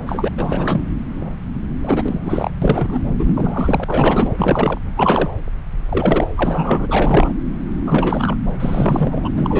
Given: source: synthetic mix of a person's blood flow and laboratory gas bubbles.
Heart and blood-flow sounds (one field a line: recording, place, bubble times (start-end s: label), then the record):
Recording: Doppler ultrasound of blood flow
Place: subclavian vein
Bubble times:
0.07-0.31 s: bubbles
0.38-0.82 s: bubbles
1.83-2.50 s: bubbles
2.62-3.02 s: bubbles
3.19-3.84 s: bubbles
3.87-4.33 s: bubbles
4.37-4.79 s: bubbles
4.96-5.32 s: bubbles
5.89-6.29 s: bubbles
6.36-7.33 s: bubbles
7.86-8.36 s: bubbles
8.60-9.29 s: bubbles
9.35-9.60 s: bubbles
From the record:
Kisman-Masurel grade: 333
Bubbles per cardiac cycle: rolling drumbeat, 9 or more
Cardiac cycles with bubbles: 50 to 99%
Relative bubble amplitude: loud (0.450 to 0.775)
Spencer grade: 3 (all of the cardiac periods contain showers or single bubble signals, but not dominating or overriding the cardiac motion signals)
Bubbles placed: anywhere in the cardiac cycle